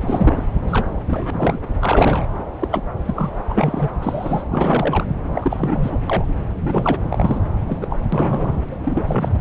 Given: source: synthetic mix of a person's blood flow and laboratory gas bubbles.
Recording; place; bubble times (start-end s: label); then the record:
Doppler ultrasound of blood flow; subclavian vein
0.01-0.44 s: bubbles
0.66-0.87 s: bubbles
1.08-1.59 s: bubbles
1.81-2.27 s: bubbles
2.60-2.67 s: bubbles
2.71-2.81 s: bubbles
3.05-3.89 s: bubbles
4.01-4.43 s: bubbles
4.50-5.04 s: bubbles
5.34-5.98 s: bubbles
6.09-6.25 s: bubbles
6.60-6.97 s: bubbles
7.09-7.40 s: bubbles
7.67-7.96 s: bubbles
8.12-8.54 s: bubbles
8.82-9.39 s: bubbles
From the record:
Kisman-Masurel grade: 243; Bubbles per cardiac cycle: several, 3 to 8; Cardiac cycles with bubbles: 100%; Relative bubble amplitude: loud (0.450 to 0.775); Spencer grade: 3 (all of the cardiac periods contain showers or single bubble signals, but not dominating or overriding the cardiac motion signals); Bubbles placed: anywhere in the cardiac cycle